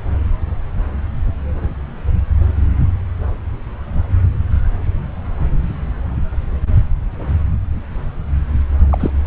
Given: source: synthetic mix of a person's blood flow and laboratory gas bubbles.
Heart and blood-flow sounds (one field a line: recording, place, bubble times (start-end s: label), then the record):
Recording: Doppler ultrasound of blood flow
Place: subclavian vein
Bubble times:
8.90-9.11 s: bubbles
From the record:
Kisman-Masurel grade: 212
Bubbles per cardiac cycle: several, 3 to 8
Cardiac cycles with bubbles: 1 to 10%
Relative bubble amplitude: moderate (0.250 to 0.450)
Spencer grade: 1 (occasional bubble signal discernible with the cardiac motion signal, with majority of cardiac periods free of bubbles)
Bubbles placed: anywhere in the cardiac cycle